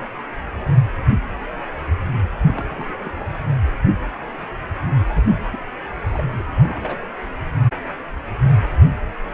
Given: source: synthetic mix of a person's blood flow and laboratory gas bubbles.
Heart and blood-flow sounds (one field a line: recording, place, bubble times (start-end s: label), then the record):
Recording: Doppler ultrasound of blood flow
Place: precordium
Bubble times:
2.44-2.94 s: bubbles
2.98-3.09 s: bubbles
3.19-3.27 s: bubbles
5.16-5.34 s: bubbles
5.45-5.57 s: bubbles
6.08-6.22 s: bubbles
6.38-6.44 s: bubbles
6.50-7.01 s: bubbles
From the record:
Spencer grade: 2 (many but less than half of the cardiac periods contain bubble signals, singularly or in groups)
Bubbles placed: anywhere in the cardiac cycle